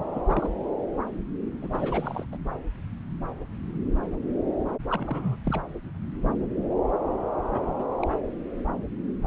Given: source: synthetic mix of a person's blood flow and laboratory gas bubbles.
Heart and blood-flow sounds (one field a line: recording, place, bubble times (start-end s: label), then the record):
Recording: Doppler ultrasound of blood flow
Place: subclavian vein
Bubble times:
0.00-0.03 s: bubbles
0.10-0.22 s: bubbles
0.27-0.50 s: bubbles
1.61-1.69 s: bubbles
1.73-2.25 s: bubbles
2.32-2.37 s: bubbles
4.90-5.36 s: bubbles
5.46-5.62 s: bubbles
7.52-7.76 s: bubbles
7.79-7.84 s: bubbles
8.02-8.09 s: bubbles
From the record:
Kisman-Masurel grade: 221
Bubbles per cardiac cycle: several, 3 to 8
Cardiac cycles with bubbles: 10 to 50%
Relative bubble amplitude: barely perceptible (0.100 to 0.250)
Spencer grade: 2 (many but less than half of the cardiac periods contain bubble signals, singularly or in groups)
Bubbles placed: anywhere in the cardiac cycle